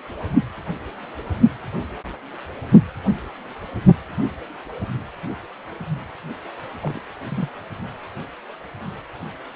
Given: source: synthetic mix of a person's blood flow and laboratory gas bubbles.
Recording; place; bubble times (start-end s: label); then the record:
Doppler ultrasound of blood flow; precordium
6.82-7.00 s: bubbles
7.25-7.49 s: bubbles
From the record:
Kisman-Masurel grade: 111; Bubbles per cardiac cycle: 1 to 2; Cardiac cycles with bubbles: 1 to 10%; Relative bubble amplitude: barely perceptible (0.100 to 0.250); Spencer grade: 1 (occasional bubble signal discernible with the cardiac motion signal, with majority of cardiac periods free of bubbles); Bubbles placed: anywhere in the cardiac cycle